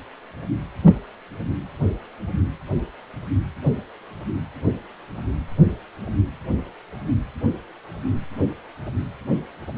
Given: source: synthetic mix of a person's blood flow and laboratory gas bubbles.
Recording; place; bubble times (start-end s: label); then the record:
Doppler ultrasound of blood flow; precordium
no bubbles
From the record:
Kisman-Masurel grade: 000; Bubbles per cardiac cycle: 0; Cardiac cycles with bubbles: 0%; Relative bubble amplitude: no bubbles discernible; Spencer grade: 0 (complete lack of bubble signals)